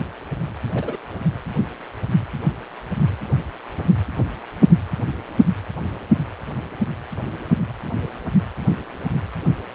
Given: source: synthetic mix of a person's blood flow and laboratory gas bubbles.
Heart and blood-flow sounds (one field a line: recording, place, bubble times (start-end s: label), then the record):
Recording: Doppler ultrasound of blood flow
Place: precordium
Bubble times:
0.74-0.97 s: bubbles
From the record:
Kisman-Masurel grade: 111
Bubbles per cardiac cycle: 1 to 2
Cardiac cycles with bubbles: 1 to 10%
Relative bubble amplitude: barely perceptible (0.100 to 0.250)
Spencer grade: 1 (occasional bubble signal discernible with the cardiac motion signal, with majority of cardiac periods free of bubbles)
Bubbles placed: anywhere in the cardiac cycle